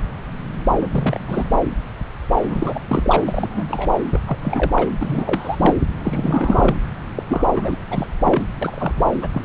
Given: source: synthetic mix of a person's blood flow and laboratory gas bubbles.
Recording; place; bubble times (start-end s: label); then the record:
Doppler ultrasound of blood flow; subclavian vein
0.76-0.88 s: bubbles
0.91-1.57 s: bubbles
2.43-3.24 s: bubbles
3.28-3.93 s: bubbles
4.12-4.21 s: bubbles
4.27-4.38 s: bubbles
4.42-4.91 s: bubbles
5.00-5.75 s: bubbles
5.96-6.75 s: bubbles
7.15-7.23 s: bubbles
7.27-7.77 s: bubbles
7.90-8.07 s: bubbles
8.24-8.43 s: bubbles
8.62-8.93 s: bubbles
8.96-9.07 s: bubbles
9.21-9.29 s: bubbles
9.34-9.44 s: bubbles
From the record:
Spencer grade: 3 (all of the cardiac periods contain showers or single bubble signals, but not dominating or overriding the cardiac motion signals); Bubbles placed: anywhere in the cardiac cycle